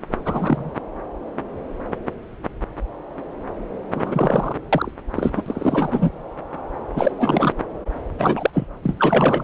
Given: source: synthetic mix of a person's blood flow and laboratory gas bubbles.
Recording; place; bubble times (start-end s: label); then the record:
Doppler ultrasound of blood flow; subclavian vein
0.25-0.70 s: bubbles
3.95-4.56 s: bubbles
4.72-4.92 s: bubbles
5.16-5.42 s: bubbles
5.46-6.10 s: bubbles
6.96-7.52 s: bubbles
8.18-8.50 s: bubbles
8.53-8.66 s: bubbles
8.84-9.44 s: bubbles
From the record:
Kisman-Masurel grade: 232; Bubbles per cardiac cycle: several, 3 to 8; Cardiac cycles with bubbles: 50 to 99%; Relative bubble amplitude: moderate (0.250 to 0.450); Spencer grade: 3 (all of the cardiac periods contain showers or single bubble signals, but not dominating or overriding the cardiac motion signals); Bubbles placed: anywhere in the cardiac cycle